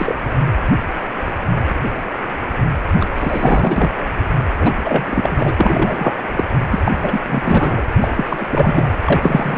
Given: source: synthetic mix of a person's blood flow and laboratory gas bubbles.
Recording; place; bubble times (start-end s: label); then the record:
Doppler ultrasound of blood flow; precordium
0.00-0.14 s: bubbles
2.99-3.06 s: bubbles
3.17-3.91 s: bubbles
4.60-4.72 s: bubbles
4.84-5.54 s: bubbles
5.57-6.17 s: bubbles
6.35-6.43 s: bubbles
6.71-6.79 s: bubbles
6.85-7.22 s: bubbles
7.26-7.82 s: bubbles
8.02-8.10 s: bubbles
8.12-8.96 s: bubbles
9.04-9.58 s: bubbles
From the record:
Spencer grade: 3 (all of the cardiac periods contain showers or single bubble signals, but not dominating or overriding the cardiac motion signals); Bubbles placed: anywhere in the cardiac cycle